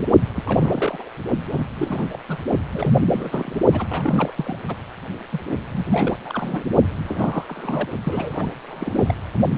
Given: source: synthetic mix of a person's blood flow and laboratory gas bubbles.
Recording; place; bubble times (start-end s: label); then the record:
Doppler ultrasound of blood flow; precordium
0.00-0.07 s: bubbles
0.35-0.43 s: bubbles
0.46-1.09 s: bubbles
1.50-1.68 s: bubbles
1.75-2.06 s: bubbles
2.12-2.18 s: bubbles
2.29-2.37 s: bubbles
2.72-3.54 s: bubbles
3.72-3.86 s: bubbles
3.90-4.32 s: bubbles
4.37-4.58 s: bubbles
4.68-4.76 s: bubbles
5.31-5.40 s: bubbles
5.71-6.16 s: bubbles
6.25-6.64 s: bubbles
7.03-7.45 s: bubbles
7.48-7.88 s: bubbles
8.04-8.50 s: bubbles
8.66-9.14 s: bubbles
9.56-9.58 s: bubbles
From the record:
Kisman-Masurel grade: 342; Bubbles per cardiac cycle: rolling drumbeat, 9 or more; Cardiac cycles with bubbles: 100%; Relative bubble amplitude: moderate (0.250 to 0.450); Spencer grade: 3 (all of the cardiac periods contain showers or single bubble signals, but not dominating or overriding the cardiac motion signals); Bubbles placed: only in the low amplitude regions of the cardiac cycle